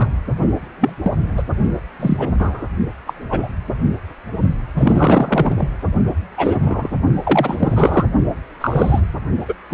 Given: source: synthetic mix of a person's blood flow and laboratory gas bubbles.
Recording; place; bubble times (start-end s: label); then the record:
Doppler ultrasound of blood flow; precordium
0.00-0.09 s: bubbles
0.77-0.94 s: bubbles
1.03-1.11 s: bubbles
1.36-1.43 s: bubbles
2.00-2.30 s: bubbles
2.39-2.65 s: bubbles
3.06-3.14 s: bubbles
3.30-3.48 s: bubbles
4.76-5.68 s: bubbles
6.37-6.89 s: bubbles
7.24-8.05 s: bubbles
8.60-9.00 s: bubbles
9.40-9.56 s: bubbles
9.71-9.74 s: bubbles
From the record:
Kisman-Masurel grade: 243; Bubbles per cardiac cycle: several, 3 to 8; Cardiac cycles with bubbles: 100%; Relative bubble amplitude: loud (0.450 to 0.775); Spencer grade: 3 (all of the cardiac periods contain showers or single bubble signals, but not dominating or overriding the cardiac motion signals); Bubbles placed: only in the low amplitude regions of the cardiac cycle